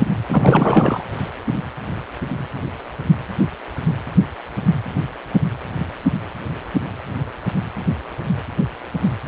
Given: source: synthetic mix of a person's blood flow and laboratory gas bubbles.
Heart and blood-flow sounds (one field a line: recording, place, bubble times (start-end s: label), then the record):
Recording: Doppler ultrasound of blood flow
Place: precordium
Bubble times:
0.28-1.03 s: bubbles
From the record:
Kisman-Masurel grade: 213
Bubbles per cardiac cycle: several, 3 to 8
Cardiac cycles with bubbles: 1 to 10%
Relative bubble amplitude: loud (0.450 to 0.775)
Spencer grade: 1 (occasional bubble signal discernible with the cardiac motion signal, with majority of cardiac periods free of bubbles)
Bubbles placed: anywhere in the cardiac cycle